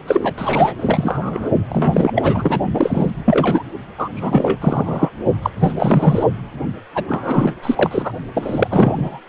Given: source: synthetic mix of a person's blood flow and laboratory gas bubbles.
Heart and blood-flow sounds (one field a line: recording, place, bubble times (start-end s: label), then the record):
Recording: Doppler ultrasound of blood flow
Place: precordium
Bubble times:
0.07-0.34 s: bubbles
0.38-0.75 s: bubbles
0.79-1.50 s: bubbles
1.69-2.12 s: bubbles
2.15-2.59 s: bubbles
2.74-3.10 s: bubbles
3.25-3.62 s: bubbles
3.98-4.08 s: bubbles
4.15-4.58 s: bubbles
4.61-5.10 s: bubbles
5.42-5.50 s: bubbles
5.59-5.74 s: bubbles
5.77-6.25 s: bubbles
6.95-7.04 s: bubbles
7.08-7.53 s: bubbles
7.62-8.12 s: bubbles
8.34-8.68 s: bubbles
8.71-9.20 s: bubbles
From the record:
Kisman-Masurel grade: 343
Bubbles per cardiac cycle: rolling drumbeat, 9 or more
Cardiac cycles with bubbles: 100%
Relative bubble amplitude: loud (0.450 to 0.775)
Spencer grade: 3 (all of the cardiac periods contain showers or single bubble signals, but not dominating or overriding the cardiac motion signals)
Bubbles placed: only in the low amplitude regions of the cardiac cycle